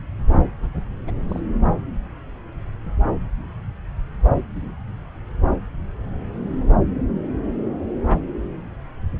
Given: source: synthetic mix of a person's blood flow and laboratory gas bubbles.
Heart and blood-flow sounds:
Doppler ultrasound of blood flow; subclavian vein
0.60-0.73 s: bubbles
1.06-1.25 s: bubbles
1.28-1.40 s: bubbles
From the record:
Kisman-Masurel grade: 221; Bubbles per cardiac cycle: several, 3 to 8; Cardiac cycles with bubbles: 10 to 50%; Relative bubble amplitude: barely perceptible (0.100 to 0.250); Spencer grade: 2 (many but less than half of the cardiac periods contain bubble signals, singularly or in groups); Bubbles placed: anywhere in the cardiac cycle

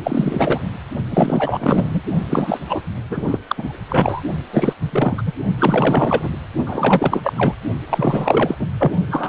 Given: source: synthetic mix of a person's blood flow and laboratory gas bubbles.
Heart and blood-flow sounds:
Doppler ultrasound of blood flow; precordium
0.03-0.70 s: bubbles
1.10-2.01 s: bubbles
2.29-2.59 s: bubbles
2.68-2.81 s: bubbles
3.09-3.38 s: bubbles
3.47-3.79 s: bubbles
3.88-4.21 s: bubbles
4.53-4.73 s: bubbles
4.81-5.33 s: bubbles
5.58-6.29 s: bubbles
6.66-7.54 s: bubbles
7.90-8.56 s: bubbles
8.59-8.67 s: bubbles
8.79-8.92 s: bubbles
9.10-9.29 s: bubbles
From the record:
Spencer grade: 4 (maximum detectable bubble signal sounding continuously throughout systole and diastole of every cardiac period, and overriding the amplitude of the normal cardiac signals); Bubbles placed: only in the low amplitude regions of the cardiac cycle

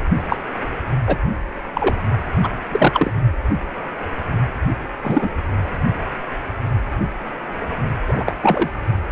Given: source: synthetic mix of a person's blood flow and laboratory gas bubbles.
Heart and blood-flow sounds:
Doppler ultrasound of blood flow; precordium
0.29-0.36 s: bubbles
1.06-1.18 s: bubbles
1.75-1.96 s: bubbles
2.42-2.50 s: bubbles
2.71-3.11 s: bubbles
5.04-5.33 s: bubbles
8.07-8.23 s: bubbles
8.26-8.36 s: bubbles
8.43-8.69 s: bubbles
From the record:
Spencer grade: 2 (many but less than half of the cardiac periods contain bubble signals, singularly or in groups); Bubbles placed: only in the low amplitude regions of the cardiac cycle

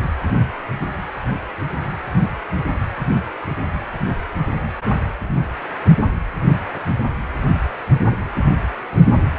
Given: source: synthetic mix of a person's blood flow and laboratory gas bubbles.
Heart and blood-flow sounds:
Doppler ultrasound of blood flow; precordium
no bubbles
From the record:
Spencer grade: 0 (complete lack of bubble signals)

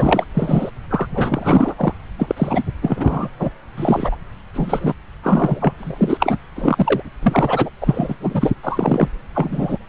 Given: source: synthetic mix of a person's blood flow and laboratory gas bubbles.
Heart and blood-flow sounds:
Doppler ultrasound of blood flow; subclavian vein
0.00-0.24 s: bubbles
0.34-0.71 s: bubbles
0.90-1.07 s: bubbles
1.10-1.74 s: bubbles
1.77-1.94 s: bubbles
2.19-2.63 s: bubbles
2.81-3.28 s: bubbles
3.39-3.50 s: bubbles
3.77-4.16 s: bubbles
4.54-4.93 s: bubbles
5.23-5.72 s: bubbles
5.79-6.38 s: bubbles
6.55-7.03 s: bubbles
7.22-7.70 s: bubbles
7.81-8.16 s: bubbles
8.20-8.54 s: bubbles
8.63-9.09 s: bubbles
9.35-9.78 s: bubbles
From the record:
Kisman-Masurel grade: 343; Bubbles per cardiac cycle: rolling drumbeat, 9 or more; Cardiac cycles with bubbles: 100%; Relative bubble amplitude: loud (0.450 to 0.775); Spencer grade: 3 (all of the cardiac periods contain showers or single bubble signals, but not dominating or overriding the cardiac motion signals); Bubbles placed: anywhere in the cardiac cycle

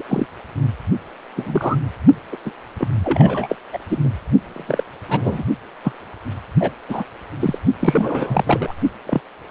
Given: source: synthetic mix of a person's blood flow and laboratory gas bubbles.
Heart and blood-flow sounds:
Doppler ultrasound of blood flow; precordium
0.00-0.03 s: bubbles
0.09-0.26 s: bubbles
1.36-1.81 s: bubbles
2.32-2.36 s: bubbles
2.45-2.52 s: bubbles
2.79-2.89 s: bubbles
3.04-3.56 s: bubbles
3.73-3.78 s: bubbles
3.90-3.99 s: bubbles
4.04-4.10 s: bubbles
4.42-4.85 s: bubbles
5.08-5.44 s: bubbles
5.83-5.92 s: bubbles
6.59-6.72 s: bubbles
6.88-7.04 s: bubbles
7.40-7.58 s: bubbles
7.79-8.72 s: bubbles
9.05-9.21 s: bubbles
From the record:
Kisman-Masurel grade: 232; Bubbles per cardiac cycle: several, 3 to 8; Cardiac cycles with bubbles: 50 to 99%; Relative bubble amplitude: moderate (0.250 to 0.450); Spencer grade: 3 (all of the cardiac periods contain showers or single bubble signals, but not dominating or overriding the cardiac motion signals); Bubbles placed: only in the low amplitude regions of the cardiac cycle

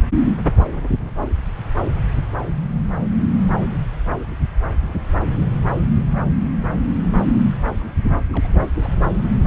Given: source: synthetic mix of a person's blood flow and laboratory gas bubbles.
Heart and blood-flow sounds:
Doppler ultrasound of blood flow; subclavian vein
8.32-8.48 s: bubbles
8.76-8.94 s: bubbles
From the record:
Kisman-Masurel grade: 211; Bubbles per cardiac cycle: several, 3 to 8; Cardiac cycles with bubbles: 1 to 10%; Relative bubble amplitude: barely perceptible (0.100 to 0.250); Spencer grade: 1 (occasional bubble signal discernible with the cardiac motion signal, with majority of cardiac periods free of bubbles); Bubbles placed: anywhere in the cardiac cycle

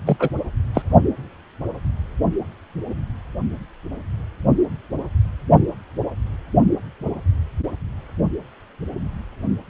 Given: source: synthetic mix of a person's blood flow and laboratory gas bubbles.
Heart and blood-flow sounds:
Doppler ultrasound of blood flow; precordium
0.05-0.30 s: bubbles
0.74-0.82 s: bubbles
From the record:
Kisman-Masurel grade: 213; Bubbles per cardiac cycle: several, 3 to 8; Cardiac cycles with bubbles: 1 to 10%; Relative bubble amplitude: loud (0.450 to 0.775); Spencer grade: 1 (occasional bubble signal discernible with the cardiac motion signal, with majority of cardiac periods free of bubbles); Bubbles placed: only in the low amplitude regions of the cardiac cycle

